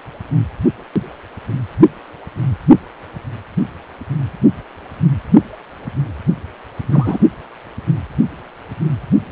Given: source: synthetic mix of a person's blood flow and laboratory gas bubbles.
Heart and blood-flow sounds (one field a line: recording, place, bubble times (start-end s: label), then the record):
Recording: Doppler ultrasound of blood flow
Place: precordium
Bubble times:
6.91-7.19 s: bubbles
From the record:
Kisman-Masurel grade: 123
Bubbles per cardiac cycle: 1 to 2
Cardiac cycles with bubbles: 10 to 50%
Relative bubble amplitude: loud (0.450 to 0.775)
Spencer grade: 2 (many but less than half of the cardiac periods contain bubble signals, singularly or in groups)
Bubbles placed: only in the low amplitude regions of the cardiac cycle